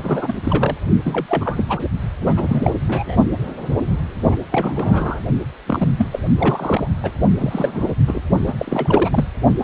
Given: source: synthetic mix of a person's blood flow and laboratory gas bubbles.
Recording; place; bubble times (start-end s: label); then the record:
Doppler ultrasound of blood flow; precordium
0.03-0.34 s: bubbles
0.43-0.77 s: bubbles
1.04-1.26 s: bubbles
1.28-1.64 s: bubbles
1.69-1.80 s: bubbles
2.21-2.72 s: bubbles
2.88-3.17 s: bubbles
4.29-4.37 s: bubbles
4.51-5.21 s: bubbles
5.66-5.88 s: bubbles
5.96-6.08 s: bubbles
6.12-6.20 s: bubbles
6.38-6.88 s: bubbles
7.03-7.11 s: bubbles
7.40-7.94 s: bubbles
8.07-8.23 s: bubbles
8.38-9.25 s: bubbles
From the record:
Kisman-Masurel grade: 332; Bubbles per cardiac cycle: rolling drumbeat, 9 or more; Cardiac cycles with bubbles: 50 to 99%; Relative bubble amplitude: moderate (0.250 to 0.450); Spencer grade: 3 (all of the cardiac periods contain showers or single bubble signals, but not dominating or overriding the cardiac motion signals); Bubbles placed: only in the low amplitude regions of the cardiac cycle